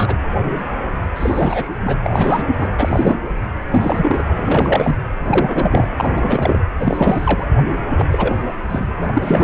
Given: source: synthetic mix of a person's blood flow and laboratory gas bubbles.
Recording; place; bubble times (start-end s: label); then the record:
Doppler ultrasound of blood flow; precordium
0.00-0.15 s: bubbles
1.16-1.98 s: bubbles
2.04-2.45 s: bubbles
2.48-2.69 s: bubbles
2.78-3.20 s: bubbles
3.72-4.23 s: bubbles
4.34-4.96 s: bubbles
5.27-5.87 s: bubbles
5.96-6.63 s: bubbles
6.79-7.46 s: bubbles
7.98-8.05 s: bubbles
8.11-8.36 s: bubbles
8.70-8.91 s: bubbles
8.96-9.12 s: bubbles
9.15-9.44 s: bubbles
From the record:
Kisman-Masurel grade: 333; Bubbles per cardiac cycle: rolling drumbeat, 9 or more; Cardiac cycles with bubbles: 50 to 99%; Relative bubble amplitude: loud (0.450 to 0.775); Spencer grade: 3 (all of the cardiac periods contain showers or single bubble signals, but not dominating or overriding the cardiac motion signals); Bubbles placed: anywhere in the cardiac cycle